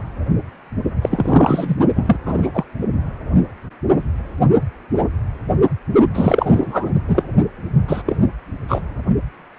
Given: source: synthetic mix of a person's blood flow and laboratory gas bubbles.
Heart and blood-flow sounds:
Doppler ultrasound of blood flow; precordium
1.02-1.75 s: bubbles
1.96-2.17 s: bubbles
2.25-2.51 s: bubbles
2.54-2.64 s: bubbles
6.14-6.92 s: bubbles
7.08-7.23 s: bubbles
7.88-8.01 s: bubbles
8.06-8.16 s: bubbles
8.68-8.81 s: bubbles
From the record:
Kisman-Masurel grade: 233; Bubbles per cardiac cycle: several, 3 to 8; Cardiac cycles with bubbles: 50 to 99%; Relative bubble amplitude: loud (0.450 to 0.775); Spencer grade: 3 (all of the cardiac periods contain showers or single bubble signals, but not dominating or overriding the cardiac motion signals); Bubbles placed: only in the low amplitude regions of the cardiac cycle

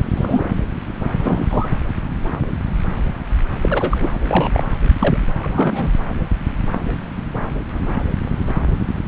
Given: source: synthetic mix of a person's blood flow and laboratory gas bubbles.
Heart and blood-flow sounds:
Doppler ultrasound of blood flow; subclavian vein
0.16-0.48 s: bubbles
1.14-1.67 s: bubbles
3.61-4.12 s: bubbles
4.23-4.68 s: bubbles
4.99-5.17 s: bubbles
5.43-5.88 s: bubbles
From the record:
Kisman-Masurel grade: 222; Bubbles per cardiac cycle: several, 3 to 8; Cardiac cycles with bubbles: 10 to 50%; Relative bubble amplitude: moderate (0.250 to 0.450); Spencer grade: 2 (many but less than half of the cardiac periods contain bubble signals, singularly or in groups); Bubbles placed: anywhere in the cardiac cycle

